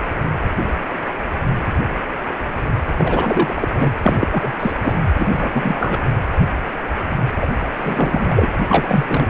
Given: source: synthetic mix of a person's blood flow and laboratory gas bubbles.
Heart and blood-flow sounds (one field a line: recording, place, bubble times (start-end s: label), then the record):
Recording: Doppler ultrasound of blood flow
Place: precordium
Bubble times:
2.97-3.69 s: bubbles
3.80-3.92 s: bubbles
4.02-4.27 s: bubbles
4.31-4.52 s: bubbles
4.59-4.72 s: bubbles
4.82-4.95 s: bubbles
5.18-5.50 s: bubbles
5.53-5.99 s: bubbles
7.40-7.47 s: bubbles
7.82-8.47 s: bubbles
8.69-9.28 s: bubbles
From the record:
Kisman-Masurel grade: 233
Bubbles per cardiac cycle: several, 3 to 8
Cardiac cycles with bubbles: 50 to 99%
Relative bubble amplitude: loud (0.450 to 0.775)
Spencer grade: 3 (all of the cardiac periods contain showers or single bubble signals, but not dominating or overriding the cardiac motion signals)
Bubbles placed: anywhere in the cardiac cycle